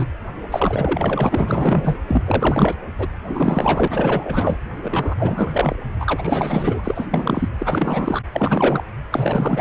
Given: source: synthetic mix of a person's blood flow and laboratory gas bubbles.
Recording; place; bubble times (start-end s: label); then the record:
Doppler ultrasound of blood flow; precordium
0.00-0.04 s: bubbles
0.48-1.97 s: bubbles
2.08-2.23 s: bubbles
2.26-2.76 s: bubbles
2.98-3.08 s: bubbles
3.24-4.58 s: bubbles
4.83-5.76 s: bubbles
5.99-7.08 s: bubbles
7.13-7.49 s: bubbles
7.58-8.21 s: bubbles
8.32-8.83 s: bubbles
9.11-9.61 s: bubbles
From the record:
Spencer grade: 4 (maximum detectable bubble signal sounding continuously throughout systole and diastole of every cardiac period, and overriding the amplitude of the normal cardiac signals); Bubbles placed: anywhere in the cardiac cycle